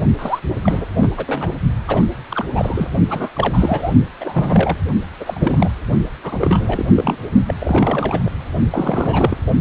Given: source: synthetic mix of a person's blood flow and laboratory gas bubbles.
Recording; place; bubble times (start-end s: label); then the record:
Doppler ultrasound of blood flow; precordium
0.18-0.40 s: bubbles
0.64-0.85 s: bubbles
1.01-1.10 s: bubbles
1.17-1.51 s: bubbles
1.88-2.04 s: bubbles
2.30-2.46 s: bubbles
2.50-2.92 s: bubbles
3.09-3.29 s: bubbles
3.34-3.92 s: bubbles
4.20-4.76 s: bubbles
5.20-5.72 s: bubbles
6.24-6.85 s: bubbles
6.95-7.16 s: bubbles
7.47-7.54 s: bubbles
7.60-8.20 s: bubbles
8.25-8.30 s: bubbles
8.70-9.38 s: bubbles
From the record:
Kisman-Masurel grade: 342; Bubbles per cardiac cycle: rolling drumbeat, 9 or more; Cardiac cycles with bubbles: 100%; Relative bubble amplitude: moderate (0.250 to 0.450); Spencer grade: 3 (all of the cardiac periods contain showers or single bubble signals, but not dominating or overriding the cardiac motion signals); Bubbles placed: only in the low amplitude regions of the cardiac cycle